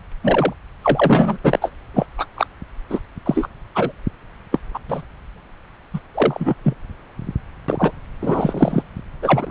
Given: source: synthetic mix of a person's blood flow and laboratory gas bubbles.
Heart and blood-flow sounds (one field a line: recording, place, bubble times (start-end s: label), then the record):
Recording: Doppler ultrasound of blood flow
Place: subclavian vein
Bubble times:
0.23-0.53 s: bubbles
0.81-1.38 s: bubbles
1.44-1.71 s: bubbles
1.94-2.06 s: bubbles
2.17-2.25 s: bubbles
2.36-2.46 s: bubbles
2.90-2.99 s: bubbles
3.25-3.47 s: bubbles
3.75-3.92 s: bubbles
4.51-4.59 s: bubbles
4.74-4.80 s: bubbles
4.88-5.02 s: bubbles
5.93-6.00 s: bubbles
6.14-6.54 s: bubbles
6.63-6.74 s: bubbles
7.68-7.92 s: bubbles
8.21-8.82 s: bubbles
9.21-9.51 s: bubbles
From the record:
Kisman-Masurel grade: 243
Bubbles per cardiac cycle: several, 3 to 8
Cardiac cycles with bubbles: 100%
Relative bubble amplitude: loud (0.450 to 0.775)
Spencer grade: 3 (all of the cardiac periods contain showers or single bubble signals, but not dominating or overriding the cardiac motion signals)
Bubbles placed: anywhere in the cardiac cycle